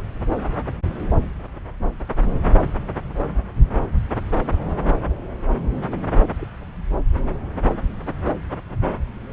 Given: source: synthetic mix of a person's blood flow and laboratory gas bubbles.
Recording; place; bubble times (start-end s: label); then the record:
Doppler ultrasound of blood flow; subclavian vein
6.37-6.45 s: bubbles
From the record:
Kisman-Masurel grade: 111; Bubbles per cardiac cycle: 1 to 2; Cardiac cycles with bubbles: 1 to 10%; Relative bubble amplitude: barely perceptible (0.100 to 0.250); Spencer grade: 1 (occasional bubble signal discernible with the cardiac motion signal, with majority of cardiac periods free of bubbles); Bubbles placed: anywhere in the cardiac cycle